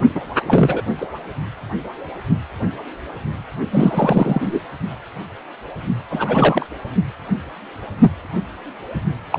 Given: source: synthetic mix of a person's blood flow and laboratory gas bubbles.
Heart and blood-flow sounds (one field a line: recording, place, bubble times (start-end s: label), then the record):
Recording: Doppler ultrasound of blood flow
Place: precordium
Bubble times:
0.15-0.20 s: bubbles
0.47-0.81 s: bubbles
0.98-1.06 s: bubbles
3.71-4.60 s: bubbles
6.10-6.66 s: bubbles
9.30-9.39 s: bubbles
From the record:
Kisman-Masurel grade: 223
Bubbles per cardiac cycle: several, 3 to 8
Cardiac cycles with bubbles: 10 to 50%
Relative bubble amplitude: loud (0.450 to 0.775)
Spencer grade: 2 (many but less than half of the cardiac periods contain bubble signals, singularly or in groups)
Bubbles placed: only in the low amplitude regions of the cardiac cycle